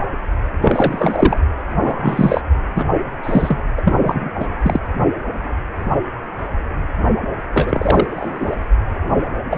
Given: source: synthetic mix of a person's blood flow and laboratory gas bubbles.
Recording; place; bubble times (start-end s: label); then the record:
Doppler ultrasound of blood flow; precordium
0.61-1.39 s: bubbles
1.81-2.41 s: bubbles
2.75-2.88 s: bubbles
3.23-3.60 s: bubbles
3.77-3.94 s: bubbles
4.03-4.30 s: bubbles
4.40-4.48 s: bubbles
4.63-4.79 s: bubbles
7.54-8.07 s: bubbles
8.10-8.56 s: bubbles
9.51-9.57 s: bubbles
From the record:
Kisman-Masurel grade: 233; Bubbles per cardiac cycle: several, 3 to 8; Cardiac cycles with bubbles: 50 to 99%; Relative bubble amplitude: loud (0.450 to 0.775); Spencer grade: 3 (all of the cardiac periods contain showers or single bubble signals, but not dominating or overriding the cardiac motion signals); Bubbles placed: anywhere in the cardiac cycle